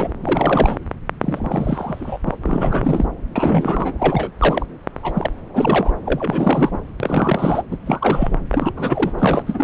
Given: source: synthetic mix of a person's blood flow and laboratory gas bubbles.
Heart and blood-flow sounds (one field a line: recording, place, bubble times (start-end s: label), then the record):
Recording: Doppler ultrasound of blood flow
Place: subclavian vein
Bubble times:
0.00-0.12 s: bubbles
0.23-0.78 s: bubbles
1.21-2.19 s: bubbles
2.26-2.35 s: bubbles
2.42-3.05 s: bubbles
3.35-3.92 s: bubbles
3.98-4.31 s: bubbles
4.38-4.66 s: bubbles
5.03-5.31 s: bubbles
5.54-5.92 s: bubbles
6.05-6.81 s: bubbles
7.00-7.62 s: bubbles
7.71-7.77 s: bubbles
7.86-8.38 s: bubbles
8.52-8.71 s: bubbles
8.77-9.12 s: bubbles
9.18-9.44 s: bubbles
9.46-9.64 s: bubbles
From the record:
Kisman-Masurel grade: 332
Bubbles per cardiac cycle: rolling drumbeat, 9 or more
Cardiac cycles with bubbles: 50 to 99%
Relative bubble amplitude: moderate (0.250 to 0.450)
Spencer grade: 3 (all of the cardiac periods contain showers or single bubble signals, but not dominating or overriding the cardiac motion signals)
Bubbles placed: anywhere in the cardiac cycle